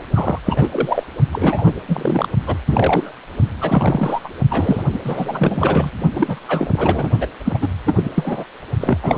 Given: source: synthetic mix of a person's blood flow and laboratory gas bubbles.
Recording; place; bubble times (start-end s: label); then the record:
Doppler ultrasound of blood flow; precordium
0.14-0.39 s: bubbles
0.46-1.03 s: bubbles
1.32-1.73 s: bubbles
1.88-2.29 s: bubbles
2.46-2.58 s: bubbles
2.67-3.12 s: bubbles
3.61-4.20 s: bubbles
4.23-4.29 s: bubbles
4.50-4.83 s: bubbles
4.93-4.99 s: bubbles
5.04-5.90 s: bubbles
6.11-6.40 s: bubbles
6.48-7.12 s: bubbles
7.21-7.26 s: bubbles
7.45-7.58 s: bubbles
7.61-7.68 s: bubbles
7.86-8.10 s: bubbles
8.15-8.45 s: bubbles
8.80-8.98 s: bubbles
9.03-9.18 s: bubbles
From the record:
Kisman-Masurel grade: 342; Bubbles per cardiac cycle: rolling drumbeat, 9 or more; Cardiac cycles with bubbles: 100%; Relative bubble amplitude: moderate (0.250 to 0.450); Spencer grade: 3 (all of the cardiac periods contain showers or single bubble signals, but not dominating or overriding the cardiac motion signals); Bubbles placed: only in the low amplitude regions of the cardiac cycle